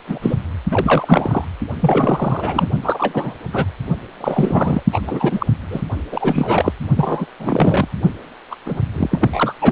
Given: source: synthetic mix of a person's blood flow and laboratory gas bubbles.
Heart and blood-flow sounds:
Doppler ultrasound of blood flow; precordium
0.07-0.36 s: bubbles
0.69-1.45 s: bubbles
1.79-2.67 s: bubbles
2.83-3.34 s: bubbles
3.53-3.65 s: bubbles
4.21-4.83 s: bubbles
4.92-5.00 s: bubbles
5.07-5.46 s: bubbles
5.71-5.82 s: bubbles
6.12-6.73 s: bubbles
6.96-7.26 s: bubbles
7.39-7.88 s: bubbles
8.51-8.55 s: bubbles
8.65-8.81 s: bubbles
8.94-9.54 s: bubbles
9.61-9.72 s: bubbles
From the record:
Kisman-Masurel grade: 343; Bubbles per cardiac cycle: rolling drumbeat, 9 or more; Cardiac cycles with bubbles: 100%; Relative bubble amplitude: loud (0.450 to 0.775); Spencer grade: 3 (all of the cardiac periods contain showers or single bubble signals, but not dominating or overriding the cardiac motion signals); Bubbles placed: only in the low amplitude regions of the cardiac cycle

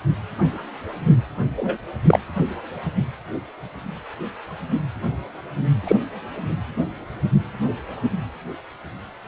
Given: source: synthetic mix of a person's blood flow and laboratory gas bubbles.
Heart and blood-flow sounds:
Doppler ultrasound of blood flow; precordium
1.56-1.77 s: bubbles
2.06-2.19 s: bubbles
5.87-5.96 s: bubbles
From the record:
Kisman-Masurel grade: 123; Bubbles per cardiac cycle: 1 to 2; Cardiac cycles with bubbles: 10 to 50%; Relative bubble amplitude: loud (0.450 to 0.775); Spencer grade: 2 (many but less than half of the cardiac periods contain bubble signals, singularly or in groups); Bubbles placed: anywhere in the cardiac cycle

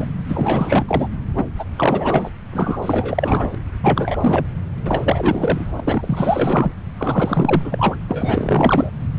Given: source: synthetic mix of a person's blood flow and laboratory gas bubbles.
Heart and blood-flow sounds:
Doppler ultrasound of blood flow; subclavian vein
0.00-0.08 s: bubbles
0.29-1.08 s: bubbles
1.36-1.45 s: bubbles
1.58-2.31 s: bubbles
2.52-2.77 s: bubbles
2.82-3.55 s: bubbles
3.82-4.17 s: bubbles
4.20-4.46 s: bubbles
4.85-5.73 s: bubbles
5.75-5.81 s: bubbles
5.83-6.72 s: bubbles
6.98-7.96 s: bubbles
8.08-8.90 s: bubbles
From the record:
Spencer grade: 4 (maximum detectable bubble signal sounding continuously throughout systole and diastole of every cardiac period, and overriding the amplitude of the normal cardiac signals); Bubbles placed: anywhere in the cardiac cycle

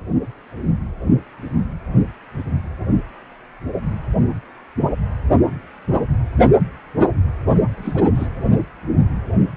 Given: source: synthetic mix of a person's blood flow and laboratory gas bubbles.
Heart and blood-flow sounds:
Doppler ultrasound of blood flow; precordium
7.70-8.04 s: bubbles
8.15-8.27 s: bubbles
From the record:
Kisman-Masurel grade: 211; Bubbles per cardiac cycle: several, 3 to 8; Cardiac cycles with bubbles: 1 to 10%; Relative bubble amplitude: barely perceptible (0.100 to 0.250); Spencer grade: 1 (occasional bubble signal discernible with the cardiac motion signal, with majority of cardiac periods free of bubbles); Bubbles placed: anywhere in the cardiac cycle

